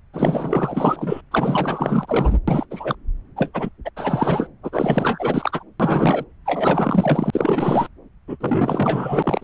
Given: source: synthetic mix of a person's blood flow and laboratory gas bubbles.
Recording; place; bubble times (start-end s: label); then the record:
Doppler ultrasound of blood flow; subclavian vein
0.12-1.21 s: bubbles
1.31-2.37 s: bubbles
2.48-2.65 s: bubbles
2.71-2.95 s: bubbles
3.36-3.51 s: bubbles
3.54-3.69 s: bubbles
3.84-3.89 s: bubbles
3.96-4.47 s: bubbles
4.62-5.63 s: bubbles
5.79-6.25 s: bubbles
6.46-7.87 s: bubbles
8.28-8.37 s: bubbles
8.40-9.44 s: bubbles
From the record:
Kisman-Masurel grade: 444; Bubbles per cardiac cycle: continuous sound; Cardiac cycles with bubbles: 100%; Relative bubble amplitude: maximal (0.775 to 0.999); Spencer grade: 4 (maximum detectable bubble signal sounding continuously throughout systole and diastole of every cardiac period, and overriding the amplitude of the normal cardiac signals); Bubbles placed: anywhere in the cardiac cycle